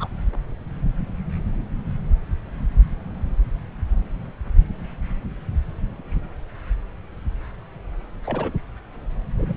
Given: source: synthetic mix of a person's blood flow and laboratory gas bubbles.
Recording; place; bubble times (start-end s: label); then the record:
Doppler ultrasound of blood flow; subclavian vein
0.00-0.09 s: bubbles
8.25-8.52 s: bubbles
9.38-9.53 s: bubbles
From the record:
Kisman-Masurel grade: 122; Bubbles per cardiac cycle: 1 to 2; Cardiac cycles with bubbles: 10 to 50%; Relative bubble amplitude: moderate (0.250 to 0.450); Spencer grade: 2 (many but less than half of the cardiac periods contain bubble signals, singularly or in groups); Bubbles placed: anywhere in the cardiac cycle